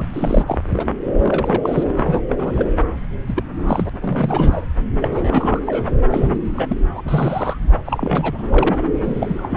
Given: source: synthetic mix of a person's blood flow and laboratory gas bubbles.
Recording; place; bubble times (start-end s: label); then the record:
Doppler ultrasound of blood flow; subclavian vein
0.00-0.04 s: bubbles
0.13-0.58 s: bubbles
0.73-0.84 s: bubbles
1.18-1.84 s: bubbles
1.96-2.20 s: bubbles
2.28-2.35 s: bubbles
2.38-2.66 s: bubbles
3.27-3.43 s: bubbles
3.67-3.89 s: bubbles
4.01-4.62 s: bubbles
5.01-5.59 s: bubbles
5.66-5.88 s: bubbles
6.10-6.39 s: bubbles
6.56-6.77 s: bubbles
6.94-7.02 s: bubbles
7.05-7.59 s: bubbles
7.85-8.90 s: bubbles
9.04-9.56 s: bubbles
From the record:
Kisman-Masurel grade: 332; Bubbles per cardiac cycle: rolling drumbeat, 9 or more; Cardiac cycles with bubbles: 50 to 99%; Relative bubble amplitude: moderate (0.250 to 0.450); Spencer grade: 3 (all of the cardiac periods contain showers or single bubble signals, but not dominating or overriding the cardiac motion signals); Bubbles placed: anywhere in the cardiac cycle